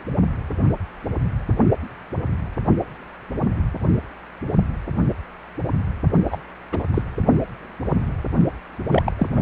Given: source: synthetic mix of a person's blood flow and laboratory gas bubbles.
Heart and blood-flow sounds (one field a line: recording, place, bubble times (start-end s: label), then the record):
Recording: Doppler ultrasound of blood flow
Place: precordium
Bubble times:
6.30-6.38 s: bubbles
6.72-6.84 s: bubbles
6.94-7.02 s: bubbles
8.89-9.12 s: bubbles
9.18-9.28 s: bubbles
9.36-9.42 s: bubbles
From the record:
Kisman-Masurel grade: 222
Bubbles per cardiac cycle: several, 3 to 8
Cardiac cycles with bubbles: 10 to 50%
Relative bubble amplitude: moderate (0.250 to 0.450)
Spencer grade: 2 (many but less than half of the cardiac periods contain bubble signals, singularly or in groups)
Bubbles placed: only in the low amplitude regions of the cardiac cycle